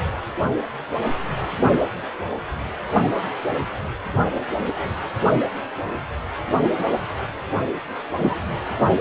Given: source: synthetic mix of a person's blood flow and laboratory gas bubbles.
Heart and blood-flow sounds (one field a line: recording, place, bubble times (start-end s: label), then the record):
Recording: Doppler ultrasound of blood flow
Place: precordium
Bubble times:
8.18-8.35 s: bubbles
From the record:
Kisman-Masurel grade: 123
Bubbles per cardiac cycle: 1 to 2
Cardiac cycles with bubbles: 10 to 50%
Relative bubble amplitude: loud (0.450 to 0.775)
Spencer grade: 2 (many but less than half of the cardiac periods contain bubble signals, singularly or in groups)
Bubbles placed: only in the low amplitude regions of the cardiac cycle